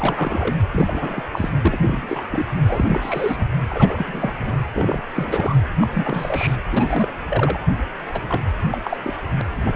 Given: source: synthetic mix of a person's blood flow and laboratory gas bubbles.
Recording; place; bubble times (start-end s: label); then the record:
Doppler ultrasound of blood flow; precordium
0.00-0.59 s: bubbles
0.71-1.28 s: bubbles
1.32-1.50 s: bubbles
1.61-1.79 s: bubbles
1.81-2.21 s: bubbles
2.29-2.46 s: bubbles
2.64-3.48 s: bubbles
3.69-4.33 s: bubbles
4.39-4.65 s: bubbles
4.74-5.03 s: bubbles
5.14-5.56 s: bubbles
5.76-5.88 s: bubbles
5.94-6.57 s: bubbles
6.71-7.12 s: bubbles
7.29-7.58 s: bubbles
8.12-8.21 s: bubbles
8.28-8.41 s: bubbles
8.70-8.78 s: bubbles
8.84-8.97 s: bubbles
9.03-9.17 s: bubbles
9.37-9.41 s: bubbles
9.56-9.76 s: bubbles
From the record:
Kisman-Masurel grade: 342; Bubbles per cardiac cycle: rolling drumbeat, 9 or more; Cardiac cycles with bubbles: 100%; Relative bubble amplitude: moderate (0.250 to 0.450); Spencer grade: 3 (all of the cardiac periods contain showers or single bubble signals, but not dominating or overriding the cardiac motion signals); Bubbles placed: anywhere in the cardiac cycle